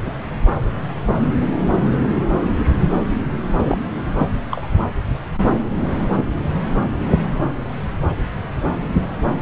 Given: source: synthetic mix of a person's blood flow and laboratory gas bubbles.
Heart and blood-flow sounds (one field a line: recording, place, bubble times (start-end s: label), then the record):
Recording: Doppler ultrasound of blood flow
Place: subclavian vein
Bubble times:
0.05-0.15 s: bubbles
3.54-3.79 s: bubbles
4.18-4.28 s: bubbles
4.51-4.67 s: bubbles
6.16-6.24 s: bubbles
From the record:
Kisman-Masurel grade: 122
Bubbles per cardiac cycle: 1 to 2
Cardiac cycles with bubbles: 10 to 50%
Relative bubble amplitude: moderate (0.250 to 0.450)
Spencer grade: 2 (many but less than half of the cardiac periods contain bubble signals, singularly or in groups)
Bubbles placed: anywhere in the cardiac cycle